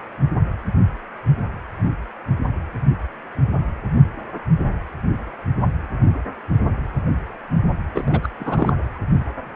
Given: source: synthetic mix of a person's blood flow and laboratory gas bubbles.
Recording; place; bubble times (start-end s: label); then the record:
Doppler ultrasound of blood flow; precordium
7.94-8.20 s: bubbles
8.22-8.28 s: bubbles
8.38-8.73 s: bubbles
From the record:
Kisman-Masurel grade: 222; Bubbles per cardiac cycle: several, 3 to 8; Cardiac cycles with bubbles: 10 to 50%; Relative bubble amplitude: moderate (0.250 to 0.450); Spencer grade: 2 (many but less than half of the cardiac periods contain bubble signals, singularly or in groups); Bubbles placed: anywhere in the cardiac cycle